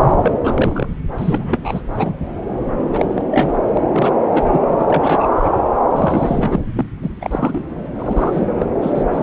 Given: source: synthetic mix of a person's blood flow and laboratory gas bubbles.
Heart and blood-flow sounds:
Doppler ultrasound of blood flow; subclavian vein
0.00-0.39 s: bubbles
0.44-0.88 s: bubbles
1.18-1.82 s: bubbles
1.95-2.14 s: bubbles
2.93-3.25 s: bubbles
3.30-3.57 s: bubbles
3.75-4.13 s: bubbles
4.30-4.61 s: bubbles
4.67-5.27 s: bubbles
5.38-5.51 s: bubbles
5.91-6.60 s: bubbles
6.75-6.85 s: bubbles
7.02-7.10 s: bubbles
7.21-7.63 s: bubbles
7.98-8.66 s: bubbles
8.81-9.06 s: bubbles
9.12-9.23 s: bubbles
From the record:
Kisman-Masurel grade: 342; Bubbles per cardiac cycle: rolling drumbeat, 9 or more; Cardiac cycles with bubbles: 100%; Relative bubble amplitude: moderate (0.250 to 0.450); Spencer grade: 3 (all of the cardiac periods contain showers or single bubble signals, but not dominating or overriding the cardiac motion signals); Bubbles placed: anywhere in the cardiac cycle

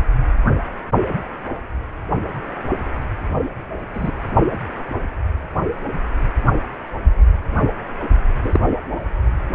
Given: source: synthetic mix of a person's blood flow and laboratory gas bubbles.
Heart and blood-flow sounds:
Doppler ultrasound of blood flow; precordium
3.94-4.12 s: bubbles
8.43-8.59 s: bubbles
From the record:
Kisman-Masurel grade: 123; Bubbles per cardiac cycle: 1 to 2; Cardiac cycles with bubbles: 10 to 50%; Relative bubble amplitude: loud (0.450 to 0.775); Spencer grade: 2 (many but less than half of the cardiac periods contain bubble signals, singularly or in groups); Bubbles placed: anywhere in the cardiac cycle

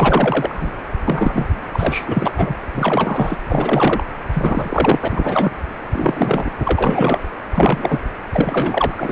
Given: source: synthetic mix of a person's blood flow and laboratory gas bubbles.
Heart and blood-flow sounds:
Doppler ultrasound of blood flow; precordium
0.00-0.71 s: bubbles
1.08-1.45 s: bubbles
1.71-2.31 s: bubbles
2.37-2.54 s: bubbles
2.63-2.67 s: bubbles
2.74-3.36 s: bubbles
3.46-4.04 s: bubbles
4.33-4.99 s: bubbles
5.02-5.08 s: bubbles
5.11-5.20 s: bubbles
5.23-5.51 s: bubbles
5.92-6.50 s: bubbles
6.64-7.26 s: bubbles
7.52-7.99 s: bubbles
8.30-8.95 s: bubbles
8.97-9.12 s: bubbles
From the record:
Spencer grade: 3 (all of the cardiac periods contain showers or single bubble signals, but not dominating or overriding the cardiac motion signals); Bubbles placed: anywhere in the cardiac cycle

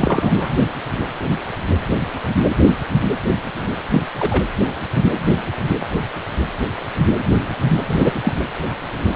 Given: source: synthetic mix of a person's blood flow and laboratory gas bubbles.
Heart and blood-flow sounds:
Doppler ultrasound of blood flow; precordium
0.00-0.55 s: bubbles
3.91-4.03 s: bubbles
4.19-4.43 s: bubbles
7.87-8.12 s: bubbles
8.24-8.33 s: bubbles
From the record:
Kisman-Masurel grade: 223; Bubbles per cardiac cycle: several, 3 to 8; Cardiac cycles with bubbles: 10 to 50%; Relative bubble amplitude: loud (0.450 to 0.775); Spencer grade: 2 (many but less than half of the cardiac periods contain bubble signals, singularly or in groups); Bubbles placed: anywhere in the cardiac cycle

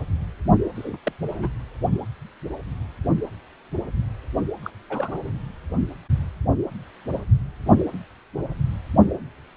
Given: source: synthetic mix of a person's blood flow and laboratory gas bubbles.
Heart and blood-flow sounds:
Doppler ultrasound of blood flow; precordium
0.75-0.98 s: bubbles
1.05-1.12 s: bubbles
1.29-1.48 s: bubbles
4.62-4.71 s: bubbles
4.89-5.31 s: bubbles
From the record:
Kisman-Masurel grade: 211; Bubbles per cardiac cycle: several, 3 to 8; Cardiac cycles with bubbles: 1 to 10%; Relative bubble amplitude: barely perceptible (0.100 to 0.250); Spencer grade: 1 (occasional bubble signal discernible with the cardiac motion signal, with majority of cardiac periods free of bubbles); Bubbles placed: anywhere in the cardiac cycle

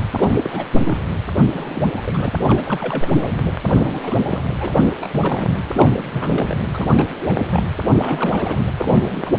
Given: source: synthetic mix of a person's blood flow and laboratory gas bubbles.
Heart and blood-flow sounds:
Doppler ultrasound of blood flow; precordium
0.13-0.65 s: bubbles
0.76-0.80 s: bubbles
0.84-0.99 s: bubbles
1.49-1.89 s: bubbles
1.96-2.01 s: bubbles
2.04-2.33 s: bubbles
2.48-3.44 s: bubbles
3.66-4.00 s: bubbles
4.03-4.44 s: bubbles
4.60-4.83 s: bubbles
4.93-5.62 s: bubbles
5.75-6.08 s: bubbles
6.11-6.54 s: bubbles
6.73-7.06 s: bubbles
7.27-7.38 s: bubbles
7.46-7.63 s: bubbles
7.99-8.73 s: bubbles
8.78-9.39 s: bubbles
From the record:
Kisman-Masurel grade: 342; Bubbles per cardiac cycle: rolling drumbeat, 9 or more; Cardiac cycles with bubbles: 100%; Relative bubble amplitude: moderate (0.250 to 0.450); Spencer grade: 3 (all of the cardiac periods contain showers or single bubble signals, but not dominating or overriding the cardiac motion signals); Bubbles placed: anywhere in the cardiac cycle

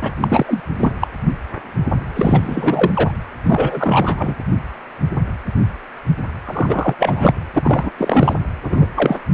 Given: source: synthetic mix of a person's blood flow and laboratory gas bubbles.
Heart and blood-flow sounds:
Doppler ultrasound of blood flow; precordium
0.01-0.11 s: bubbles
0.20-0.60 s: bubbles
0.76-0.92 s: bubbles
1.01-1.07 s: bubbles
2.15-2.91 s: bubbles
2.94-3.11 s: bubbles
3.44-4.35 s: bubbles
6.46-6.96 s: bubbles
6.99-7.35 s: bubbles
7.54-7.91 s: bubbles
7.98-8.34 s: bubbles
8.63-8.87 s: bubbles
8.95-9.19 s: bubbles
From the record:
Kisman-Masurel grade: 333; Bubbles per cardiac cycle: rolling drumbeat, 9 or more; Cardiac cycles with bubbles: 50 to 99%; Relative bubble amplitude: loud (0.450 to 0.775); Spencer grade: 3 (all of the cardiac periods contain showers or single bubble signals, but not dominating or overriding the cardiac motion signals); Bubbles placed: anywhere in the cardiac cycle

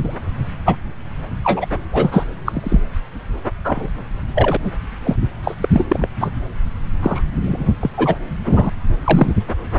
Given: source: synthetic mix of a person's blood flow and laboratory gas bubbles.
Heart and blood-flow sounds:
Doppler ultrasound of blood flow; subclavian vein
0.00-0.15 s: bubbles
0.65-0.76 s: bubbles
1.44-1.67 s: bubbles
1.92-2.26 s: bubbles
2.45-2.81 s: bubbles
3.64-3.89 s: bubbles
4.35-4.57 s: bubbles
4.63-4.72 s: bubbles
5.04-5.16 s: bubbles
5.44-5.54 s: bubbles
5.61-5.69 s: bubbles
5.72-5.85 s: bubbles
5.89-6.08 s: bubbles
6.20-6.31 s: bubbles
7.02-7.21 s: bubbles
7.46-7.76 s: bubbles
7.80-7.91 s: bubbles
7.97-8.15 s: bubbles
8.46-8.69 s: bubbles
9.04-9.33 s: bubbles
From the record:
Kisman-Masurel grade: 243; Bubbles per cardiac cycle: several, 3 to 8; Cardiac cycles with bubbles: 100%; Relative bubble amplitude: loud (0.450 to 0.775); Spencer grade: 3 (all of the cardiac periods contain showers or single bubble signals, but not dominating or overriding the cardiac motion signals); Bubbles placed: anywhere in the cardiac cycle

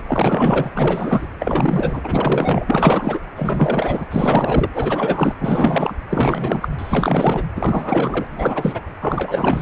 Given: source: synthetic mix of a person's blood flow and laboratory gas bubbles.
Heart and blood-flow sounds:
Doppler ultrasound of blood flow; precordium
0.00-0.02 s: bubbles
0.07-0.70 s: bubbles
0.74-1.28 s: bubbles
1.40-3.20 s: bubbles
3.36-4.05 s: bubbles
4.11-4.69 s: bubbles
4.74-5.35 s: bubbles
5.40-5.95 s: bubbles
6.09-6.69 s: bubbles
6.79-7.45 s: bubbles
7.55-8.27 s: bubbles
8.29-8.81 s: bubbles
9.00-9.61 s: bubbles
From the record:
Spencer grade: 4 (maximum detectable bubble signal sounding continuously throughout systole and diastole of every cardiac period, and overriding the amplitude of the normal cardiac signals); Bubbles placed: anywhere in the cardiac cycle

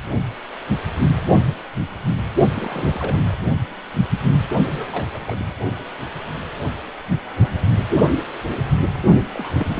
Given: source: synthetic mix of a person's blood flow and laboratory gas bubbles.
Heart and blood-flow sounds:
Doppler ultrasound of blood flow; precordium
2.51-3.38 s: bubbles
4.67-5.10 s: bubbles
5.13-5.20 s: bubbles
5.27-5.35 s: bubbles
5.41-5.45 s: bubbles
9.35-9.80 s: bubbles
From the record:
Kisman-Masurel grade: 221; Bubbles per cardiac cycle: several, 3 to 8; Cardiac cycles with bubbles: 10 to 50%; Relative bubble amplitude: barely perceptible (0.100 to 0.250); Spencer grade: 2 (many but less than half of the cardiac periods contain bubble signals, singularly or in groups); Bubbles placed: only in the low amplitude regions of the cardiac cycle

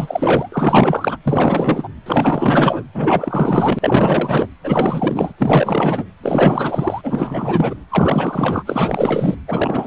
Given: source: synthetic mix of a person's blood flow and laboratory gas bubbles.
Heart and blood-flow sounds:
Doppler ultrasound of blood flow; precordium
0.00-0.49 s: bubbles
0.52-1.17 s: bubbles
1.23-1.89 s: bubbles
2.06-2.84 s: bubbles
2.94-4.49 s: bubbles
4.64-5.33 s: bubbles
5.38-6.05 s: bubbles
6.23-7.75 s: bubbles
7.90-8.63 s: bubbles
8.66-9.35 s: bubbles
9.47-9.87 s: bubbles
From the record:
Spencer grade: 4 (maximum detectable bubble signal sounding continuously throughout systole and diastole of every cardiac period, and overriding the amplitude of the normal cardiac signals); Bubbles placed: anywhere in the cardiac cycle

